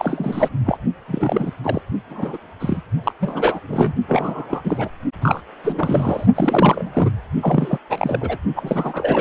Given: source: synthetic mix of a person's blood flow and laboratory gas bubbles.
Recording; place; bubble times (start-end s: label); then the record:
Doppler ultrasound of blood flow; precordium
0.00-0.49 s: bubbles
0.66-0.79 s: bubbles
1.08-1.52 s: bubbles
1.63-1.81 s: bubbles
2.10-2.38 s: bubbles
2.60-2.81 s: bubbles
3.04-3.12 s: bubbles
3.20-3.60 s: bubbles
3.68-3.93 s: bubbles
4.08-4.62 s: bubbles
4.64-4.91 s: bubbles
5.21-5.41 s: bubbles
5.64-6.26 s: bubbles
6.34-7.11 s: bubbles
7.42-7.78 s: bubbles
7.90-8.38 s: bubbles
8.55-9.21 s: bubbles
From the record:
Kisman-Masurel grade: 332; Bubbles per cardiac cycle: rolling drumbeat, 9 or more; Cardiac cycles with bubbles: 50 to 99%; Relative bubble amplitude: moderate (0.250 to 0.450); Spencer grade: 3 (all of the cardiac periods contain showers or single bubble signals, but not dominating or overriding the cardiac motion signals); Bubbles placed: only in the low amplitude regions of the cardiac cycle